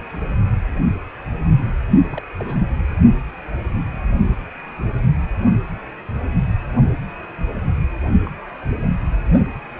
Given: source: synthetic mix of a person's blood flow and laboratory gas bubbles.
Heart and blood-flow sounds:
Doppler ultrasound of blood flow; precordium
2.10-2.23 s: bubbles
2.39-2.66 s: bubbles
8.25-8.32 s: bubbles
8.81-8.94 s: bubbles
From the record:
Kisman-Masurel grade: 121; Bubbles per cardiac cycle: 1 to 2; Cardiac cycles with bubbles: 10 to 50%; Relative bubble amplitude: barely perceptible (0.100 to 0.250); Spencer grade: 2 (many but less than half of the cardiac periods contain bubble signals, singularly or in groups); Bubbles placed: only in the low amplitude regions of the cardiac cycle

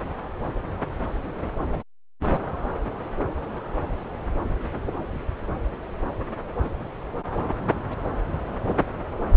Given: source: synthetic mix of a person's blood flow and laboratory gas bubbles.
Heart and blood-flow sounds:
Doppler ultrasound of blood flow; subclavian vein
no bubbles
From the record:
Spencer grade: 0 (complete lack of bubble signals)

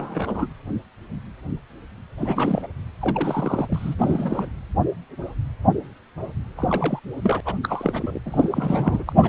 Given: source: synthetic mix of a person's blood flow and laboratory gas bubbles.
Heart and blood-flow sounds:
Doppler ultrasound of blood flow; precordium
0.00-0.49 s: bubbles
2.18-2.67 s: bubbles
3.01-3.95 s: bubbles
3.98-4.51 s: bubbles
6.57-6.99 s: bubbles
7.22-7.40 s: bubbles
7.45-7.55 s: bubbles
7.63-8.19 s: bubbles
8.25-9.04 s: bubbles
9.06-9.12 s: bubbles
9.15-9.29 s: bubbles
From the record:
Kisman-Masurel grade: 332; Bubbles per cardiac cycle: rolling drumbeat, 9 or more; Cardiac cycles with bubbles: 50 to 99%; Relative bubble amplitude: moderate (0.250 to 0.450); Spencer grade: 3 (all of the cardiac periods contain showers or single bubble signals, but not dominating or overriding the cardiac motion signals); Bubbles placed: anywhere in the cardiac cycle

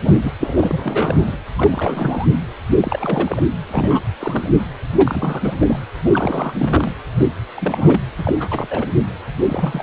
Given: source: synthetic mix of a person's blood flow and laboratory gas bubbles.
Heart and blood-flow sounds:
Doppler ultrasound of blood flow; precordium
0.02-0.32 s: bubbles
0.40-1.36 s: bubbles
1.57-2.28 s: bubbles
2.78-3.41 s: bubbles
3.71-4.02 s: bubbles
4.20-4.67 s: bubbles
4.98-5.54 s: bubbles
5.60-5.79 s: bubbles
6.03-6.54 s: bubbles
6.58-6.92 s: bubbles
7.16-7.29 s: bubbles
7.54-8.02 s: bubbles
8.19-8.33 s: bubbles
8.39-8.67 s: bubbles
8.70-8.87 s: bubbles
9.47-9.83 s: bubbles
From the record:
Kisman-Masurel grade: 342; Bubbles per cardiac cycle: rolling drumbeat, 9 or more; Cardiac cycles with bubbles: 100%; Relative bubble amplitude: moderate (0.250 to 0.450); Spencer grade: 3 (all of the cardiac periods contain showers or single bubble signals, but not dominating or overriding the cardiac motion signals); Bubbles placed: anywhere in the cardiac cycle

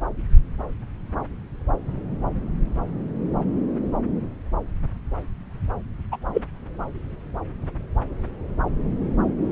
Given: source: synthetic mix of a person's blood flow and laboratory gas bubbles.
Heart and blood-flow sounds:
Doppler ultrasound of blood flow; subclavian vein
6.12-6.17 s: bubbles
6.33-6.42 s: bubbles
From the record:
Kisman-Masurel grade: 113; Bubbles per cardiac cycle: 1 to 2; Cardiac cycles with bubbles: 1 to 10%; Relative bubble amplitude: loud (0.450 to 0.775); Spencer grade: 1 (occasional bubble signal discernible with the cardiac motion signal, with majority of cardiac periods free of bubbles); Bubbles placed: anywhere in the cardiac cycle

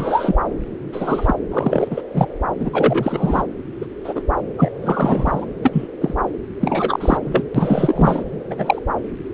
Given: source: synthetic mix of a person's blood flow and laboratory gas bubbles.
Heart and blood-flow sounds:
Doppler ultrasound of blood flow; subclavian vein
0.00-0.35 s: bubbles
0.92-1.34 s: bubbles
1.51-2.02 s: bubbles
2.13-2.26 s: bubbles
2.59-3.42 s: bubbles
3.81-3.86 s: bubbles
4.04-4.22 s: bubbles
4.58-4.71 s: bubbles
4.82-5.46 s: bubbles
5.63-5.88 s: bubbles
6.01-6.14 s: bubbles
6.60-7.17 s: bubbles
7.25-7.42 s: bubbles
7.54-8.23 s: bubbles
8.50-8.79 s: bubbles
From the record:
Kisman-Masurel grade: 243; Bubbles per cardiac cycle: several, 3 to 8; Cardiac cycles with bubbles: 100%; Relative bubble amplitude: loud (0.450 to 0.775); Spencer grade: 3 (all of the cardiac periods contain showers or single bubble signals, but not dominating or overriding the cardiac motion signals); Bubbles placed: anywhere in the cardiac cycle

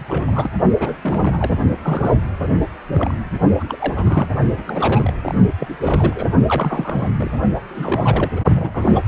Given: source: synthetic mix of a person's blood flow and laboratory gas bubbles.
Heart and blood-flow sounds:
Doppler ultrasound of blood flow; precordium
0.00-0.50 s: bubbles
0.80-0.99 s: bubbles
1.03-1.58 s: bubbles
1.82-2.20 s: bubbles
2.42-2.48 s: bubbles
2.94-3.15 s: bubbles
3.57-3.64 s: bubbles
3.68-3.77 s: bubbles
3.79-4.27 s: bubbles
4.56-5.12 s: bubbles
5.22-5.34 s: bubbles
5.59-6.35 s: bubbles
6.46-7.10 s: bubbles
7.18-7.30 s: bubbles
7.75-8.32 s: bubbles
8.36-8.42 s: bubbles
8.55-9.03 s: bubbles
From the record:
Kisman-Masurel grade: 342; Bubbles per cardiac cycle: rolling drumbeat, 9 or more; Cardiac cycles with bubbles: 100%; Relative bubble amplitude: moderate (0.250 to 0.450); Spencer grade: 3 (all of the cardiac periods contain showers or single bubble signals, but not dominating or overriding the cardiac motion signals); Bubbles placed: only in the low amplitude regions of the cardiac cycle

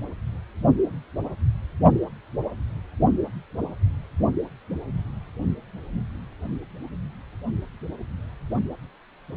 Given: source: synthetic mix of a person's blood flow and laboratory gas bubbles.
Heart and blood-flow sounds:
Doppler ultrasound of blood flow; precordium
no bubbles
From the record:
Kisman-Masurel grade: 000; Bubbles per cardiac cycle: 0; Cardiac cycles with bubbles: 0%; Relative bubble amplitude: no bubbles discernible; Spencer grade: 0 (complete lack of bubble signals)

